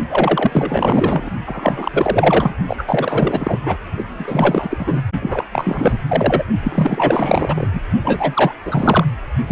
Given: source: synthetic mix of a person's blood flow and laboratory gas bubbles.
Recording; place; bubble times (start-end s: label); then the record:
Doppler ultrasound of blood flow; precordium
0.09-1.30 s: bubbles
1.46-2.54 s: bubbles
2.67-2.84 s: bubbles
2.88-3.59 s: bubbles
3.65-3.77 s: bubbles
3.96-4.04 s: bubbles
4.08-5.02 s: bubbles
5.21-5.45 s: bubbles
5.52-6.02 s: bubbles
6.08-6.44 s: bubbles
6.62-7.71 s: bubbles
7.73-7.80 s: bubbles
8.04-8.53 s: bubbles
8.65-9.05 s: bubbles
9.46-9.52 s: bubbles
From the record:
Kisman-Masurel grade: 444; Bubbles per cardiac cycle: continuous sound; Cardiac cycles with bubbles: 100%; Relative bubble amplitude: maximal (0.775 to 0.999); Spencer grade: 4 (maximum detectable bubble signal sounding continuously throughout systole and diastole of every cardiac period, and overriding the amplitude of the normal cardiac signals); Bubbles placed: only in the low amplitude regions of the cardiac cycle